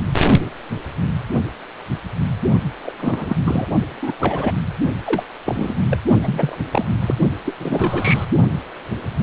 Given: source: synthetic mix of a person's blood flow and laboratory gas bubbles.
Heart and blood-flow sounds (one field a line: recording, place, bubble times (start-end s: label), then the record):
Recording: Doppler ultrasound of blood flow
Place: precordium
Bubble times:
2.82-2.92 s: bubbles
2.98-3.36 s: bubbles
3.44-3.67 s: bubbles
4.02-4.12 s: bubbles
4.20-4.52 s: bubbles
5.05-5.24 s: bubbles
5.45-5.75 s: bubbles
5.89-5.97 s: bubbles
6.23-6.58 s: bubbles
6.71-6.90 s: bubbles
7.00-7.15 s: bubbles
7.45-7.54 s: bubbles
7.60-8.24 s: bubbles
From the record:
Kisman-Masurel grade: 232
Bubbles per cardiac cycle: several, 3 to 8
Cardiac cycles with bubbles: 50 to 99%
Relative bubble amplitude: moderate (0.250 to 0.450)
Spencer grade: 3 (all of the cardiac periods contain showers or single bubble signals, but not dominating or overriding the cardiac motion signals)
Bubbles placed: only in the low amplitude regions of the cardiac cycle